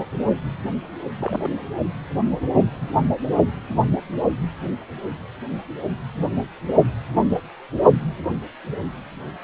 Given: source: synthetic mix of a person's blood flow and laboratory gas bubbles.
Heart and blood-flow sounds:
Doppler ultrasound of blood flow; precordium
1.20-1.49 s: bubbles
2.81-2.89 s: bubbles
From the record:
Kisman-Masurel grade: 121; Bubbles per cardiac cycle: 1 to 2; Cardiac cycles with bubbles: 10 to 50%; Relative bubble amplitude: barely perceptible (0.100 to 0.250); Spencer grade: 2 (many but less than half of the cardiac periods contain bubble signals, singularly or in groups); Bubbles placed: only in the low amplitude regions of the cardiac cycle

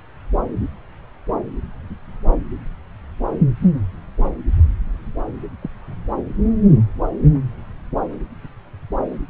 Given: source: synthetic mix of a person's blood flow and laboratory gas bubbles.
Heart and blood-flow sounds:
Doppler ultrasound of blood flow; subclavian vein
5.62-5.70 s: bubbles
From the record:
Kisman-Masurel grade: 111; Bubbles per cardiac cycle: 1 to 2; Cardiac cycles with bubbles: 1 to 10%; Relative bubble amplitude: barely perceptible (0.100 to 0.250); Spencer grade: 1 (occasional bubble signal discernible with the cardiac motion signal, with majority of cardiac periods free of bubbles); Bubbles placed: anywhere in the cardiac cycle

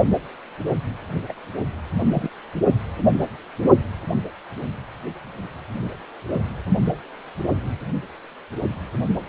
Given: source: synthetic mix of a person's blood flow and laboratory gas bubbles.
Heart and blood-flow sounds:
Doppler ultrasound of blood flow; precordium
1.28-1.32 s: bubbles
1.98-2.29 s: bubbles
From the record:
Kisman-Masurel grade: 112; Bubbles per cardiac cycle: 1 to 2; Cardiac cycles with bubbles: 1 to 10%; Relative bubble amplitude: moderate (0.250 to 0.450); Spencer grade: 1 (occasional bubble signal discernible with the cardiac motion signal, with majority of cardiac periods free of bubbles); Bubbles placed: only in the low amplitude regions of the cardiac cycle

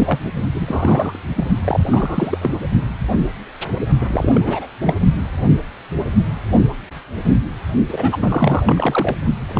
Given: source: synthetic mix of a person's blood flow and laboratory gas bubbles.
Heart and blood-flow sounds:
Doppler ultrasound of blood flow; precordium
0.00-0.20 s: bubbles
0.54-1.19 s: bubbles
1.35-1.45 s: bubbles
1.64-1.80 s: bubbles
1.91-2.38 s: bubbles
2.41-2.57 s: bubbles
4.00-4.68 s: bubbles
4.81-4.95 s: bubbles
7.89-8.17 s: bubbles
8.21-9.15 s: bubbles
9.48-9.60 s: bubbles
From the record:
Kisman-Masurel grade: 332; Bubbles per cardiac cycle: rolling drumbeat, 9 or more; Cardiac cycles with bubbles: 50 to 99%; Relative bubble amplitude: moderate (0.250 to 0.450); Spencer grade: 3 (all of the cardiac periods contain showers or single bubble signals, but not dominating or overriding the cardiac motion signals); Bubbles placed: only in the low amplitude regions of the cardiac cycle

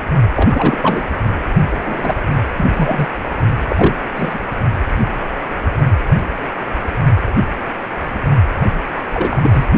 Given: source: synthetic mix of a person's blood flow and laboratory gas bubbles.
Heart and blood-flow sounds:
Doppler ultrasound of blood flow; precordium
0.36-1.03 s: bubbles
1.70-2.22 s: bubbles
2.57-2.66 s: bubbles
2.76-3.11 s: bubbles
3.68-3.95 s: bubbles
4.13-4.39 s: bubbles
8.96-9.01 s: bubbles
9.12-9.65 s: bubbles
From the record:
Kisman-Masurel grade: 232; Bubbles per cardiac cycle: several, 3 to 8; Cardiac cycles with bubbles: 50 to 99%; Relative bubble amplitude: moderate (0.250 to 0.450); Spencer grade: 3 (all of the cardiac periods contain showers or single bubble signals, but not dominating or overriding the cardiac motion signals); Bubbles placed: only in the low amplitude regions of the cardiac cycle

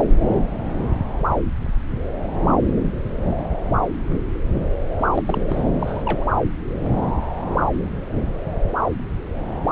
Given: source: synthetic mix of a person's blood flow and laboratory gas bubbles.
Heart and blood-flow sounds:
Doppler ultrasound of blood flow; subclavian vein
4.99-5.07 s: bubbles
5.14-5.23 s: bubbles
5.25-5.42 s: bubbles
5.47-5.63 s: bubbles
5.79-6.24 s: bubbles
From the record:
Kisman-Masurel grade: 221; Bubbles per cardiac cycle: several, 3 to 8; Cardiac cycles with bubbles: 10 to 50%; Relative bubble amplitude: barely perceptible (0.100 to 0.250); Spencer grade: 2 (many but less than half of the cardiac periods contain bubble signals, singularly or in groups); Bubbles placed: anywhere in the cardiac cycle

